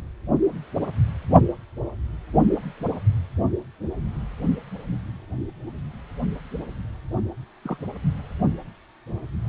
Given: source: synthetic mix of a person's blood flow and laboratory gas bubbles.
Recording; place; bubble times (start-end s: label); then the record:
Doppler ultrasound of blood flow; precordium
7.65-7.76 s: bubbles
From the record:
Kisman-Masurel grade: 111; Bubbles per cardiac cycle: 1 to 2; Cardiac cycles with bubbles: 1 to 10%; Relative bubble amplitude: barely perceptible (0.100 to 0.250); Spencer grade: 1 (occasional bubble signal discernible with the cardiac motion signal, with majority of cardiac periods free of bubbles); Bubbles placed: only in the low amplitude regions of the cardiac cycle